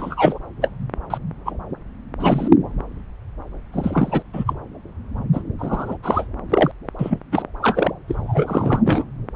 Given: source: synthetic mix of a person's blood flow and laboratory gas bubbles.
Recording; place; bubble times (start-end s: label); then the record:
Doppler ultrasound of blood flow; subclavian vein
0.00-0.38 s: bubbles
0.61-0.68 s: bubbles
1.10-1.18 s: bubbles
1.46-1.52 s: bubbles
2.20-2.48 s: bubbles
3.72-4.22 s: bubbles
4.33-4.44 s: bubbles
4.46-4.54 s: bubbles
5.33-5.42 s: bubbles
5.58-5.97 s: bubbles
6.03-6.26 s: bubbles
6.50-6.71 s: bubbles
6.99-7.18 s: bubbles
7.32-7.42 s: bubbles
7.62-7.91 s: bubbles
8.08-8.80 s: bubbles
8.85-9.04 s: bubbles
From the record:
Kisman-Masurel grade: 233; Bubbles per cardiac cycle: several, 3 to 8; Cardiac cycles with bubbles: 50 to 99%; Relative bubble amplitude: loud (0.450 to 0.775); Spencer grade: 3 (all of the cardiac periods contain showers or single bubble signals, but not dominating or overriding the cardiac motion signals); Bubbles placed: anywhere in the cardiac cycle